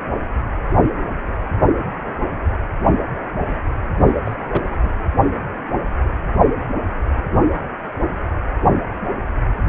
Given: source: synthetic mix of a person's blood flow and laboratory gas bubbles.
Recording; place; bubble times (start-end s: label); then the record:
Doppler ultrasound of blood flow; precordium
3.98-4.11 s: bubbles
4.25-4.37 s: bubbles
4.45-4.71 s: bubbles
4.80-4.89 s: bubbles
From the record:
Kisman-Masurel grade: 211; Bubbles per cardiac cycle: several, 3 to 8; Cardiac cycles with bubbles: 1 to 10%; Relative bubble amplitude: barely perceptible (0.100 to 0.250); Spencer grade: 1 (occasional bubble signal discernible with the cardiac motion signal, with majority of cardiac periods free of bubbles); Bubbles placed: anywhere in the cardiac cycle